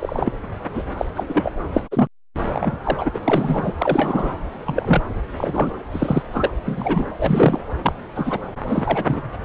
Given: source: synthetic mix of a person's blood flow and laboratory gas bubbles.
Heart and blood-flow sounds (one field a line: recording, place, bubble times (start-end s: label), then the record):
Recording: Doppler ultrasound of blood flow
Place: subclavian vein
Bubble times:
0.00-0.33 s: bubbles
0.74-0.83 s: bubbles
0.97-1.05 s: bubbles
1.15-1.23 s: bubbles
1.27-1.52 s: bubbles
1.73-1.82 s: bubbles
1.91-2.08 s: bubbles
2.52-2.77 s: bubbles
2.83-3.10 s: bubbles
3.14-3.20 s: bubbles
3.24-3.73 s: bubbles
3.78-4.36 s: bubbles
4.65-5.01 s: bubbles
5.36-5.71 s: bubbles
5.92-6.22 s: bubbles
6.32-6.53 s: bubbles
6.65-7.07 s: bubbles
7.19-7.59 s: bubbles
7.83-7.92 s: bubbles
8.15-8.40 s: bubbles
8.67-9.04 s: bubbles
9.08-9.21 s: bubbles
From the record:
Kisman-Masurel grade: 242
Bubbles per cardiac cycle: several, 3 to 8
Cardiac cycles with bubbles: 100%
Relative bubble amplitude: moderate (0.250 to 0.450)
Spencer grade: 3 (all of the cardiac periods contain showers or single bubble signals, but not dominating or overriding the cardiac motion signals)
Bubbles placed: anywhere in the cardiac cycle